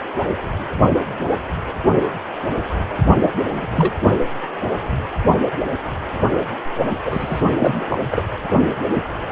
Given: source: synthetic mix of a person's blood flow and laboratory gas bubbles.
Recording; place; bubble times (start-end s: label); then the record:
Doppler ultrasound of blood flow; precordium
3.23-3.29 s: bubbles
3.52-3.69 s: bubbles
3.74-3.93 s: bubbles
6.91-7.41 s: bubbles
7.58-7.85 s: bubbles
7.88-7.98 s: bubbles
8.12-8.22 s: bubbles
From the record:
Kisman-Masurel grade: 222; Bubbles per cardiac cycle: several, 3 to 8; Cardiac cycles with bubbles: 10 to 50%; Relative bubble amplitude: moderate (0.250 to 0.450); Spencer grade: 2 (many but less than half of the cardiac periods contain bubble signals, singularly or in groups); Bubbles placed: only in the low amplitude regions of the cardiac cycle